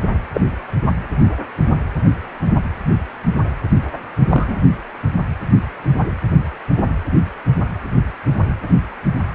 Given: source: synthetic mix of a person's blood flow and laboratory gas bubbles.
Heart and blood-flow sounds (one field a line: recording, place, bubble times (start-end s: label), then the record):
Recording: Doppler ultrasound of blood flow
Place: precordium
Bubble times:
0.33-0.41 s: bubbles
4.29-4.56 s: bubbles
From the record:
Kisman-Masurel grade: 123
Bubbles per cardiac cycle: 1 to 2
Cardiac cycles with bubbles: 10 to 50%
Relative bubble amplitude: loud (0.450 to 0.775)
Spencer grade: 2 (many but less than half of the cardiac periods contain bubble signals, singularly or in groups)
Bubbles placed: anywhere in the cardiac cycle